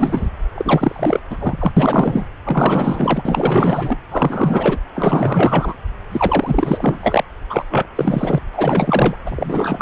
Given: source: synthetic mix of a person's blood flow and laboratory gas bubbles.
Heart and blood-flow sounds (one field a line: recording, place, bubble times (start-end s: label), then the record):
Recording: Doppler ultrasound of blood flow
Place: subclavian vein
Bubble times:
0.00-0.30 s: bubbles
0.55-1.20 s: bubbles
1.30-1.72 s: bubbles
1.76-2.28 s: bubbles
2.45-3.23 s: bubbles
3.25-3.98 s: bubbles
4.11-4.79 s: bubbles
4.94-5.76 s: bubbles
6.12-7.24 s: bubbles
7.50-7.65 s: bubbles
7.70-7.87 s: bubbles
7.95-8.38 s: bubbles
8.53-9.17 s: bubbles
9.26-9.82 s: bubbles
From the record:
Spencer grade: 4 (maximum detectable bubble signal sounding continuously throughout systole and diastole of every cardiac period, and overriding the amplitude of the normal cardiac signals)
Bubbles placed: anywhere in the cardiac cycle